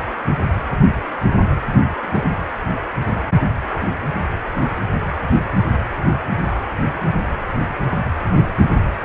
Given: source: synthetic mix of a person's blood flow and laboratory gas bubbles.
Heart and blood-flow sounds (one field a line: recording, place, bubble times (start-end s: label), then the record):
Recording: Doppler ultrasound of blood flow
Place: precordium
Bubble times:
2.02-2.25 s: bubbles
From the record:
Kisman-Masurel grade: 111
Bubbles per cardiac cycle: 1 to 2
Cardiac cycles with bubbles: 1 to 10%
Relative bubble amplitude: barely perceptible (0.100 to 0.250)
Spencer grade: 1 (occasional bubble signal discernible with the cardiac motion signal, with majority of cardiac periods free of bubbles)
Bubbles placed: anywhere in the cardiac cycle